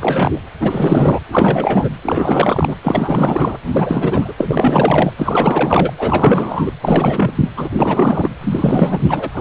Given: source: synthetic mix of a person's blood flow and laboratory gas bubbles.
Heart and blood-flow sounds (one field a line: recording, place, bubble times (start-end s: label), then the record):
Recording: Doppler ultrasound of blood flow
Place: precordium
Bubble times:
0.00-0.40 s: bubbles
0.59-1.20 s: bubbles
1.27-1.89 s: bubbles
2.03-2.76 s: bubbles
2.81-3.58 s: bubbles
3.64-4.33 s: bubbles
4.37-5.12 s: bubbles
5.17-5.92 s: bubbles
5.97-6.72 s: bubbles
6.82-7.33 s: bubbles
7.36-7.49 s: bubbles
7.57-8.30 s: bubbles
8.41-9.28 s: bubbles
9.34-9.41 s: bubbles
From the record:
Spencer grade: 4 (maximum detectable bubble signal sounding continuously throughout systole and diastole of every cardiac period, and overriding the amplitude of the normal cardiac signals)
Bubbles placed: anywhere in the cardiac cycle